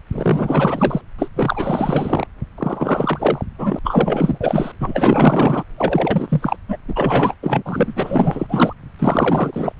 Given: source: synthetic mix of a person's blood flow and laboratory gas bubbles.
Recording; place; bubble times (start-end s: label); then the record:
Doppler ultrasound of blood flow; subclavian vein
0.12-1.01 s: bubbles
1.18-1.28 s: bubbles
1.36-2.27 s: bubbles
2.57-3.45 s: bubbles
3.58-3.79 s: bubbles
3.84-4.38 s: bubbles
4.40-4.72 s: bubbles
4.80-5.64 s: bubbles
5.78-6.57 s: bubbles
6.68-6.78 s: bubbles
6.88-7.36 s: bubbles
7.42-7.62 s: bubbles
7.65-8.73 s: bubbles
8.99-9.72 s: bubbles
From the record:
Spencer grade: 4 (maximum detectable bubble signal sounding continuously throughout systole and diastole of every cardiac period, and overriding the amplitude of the normal cardiac signals); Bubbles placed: anywhere in the cardiac cycle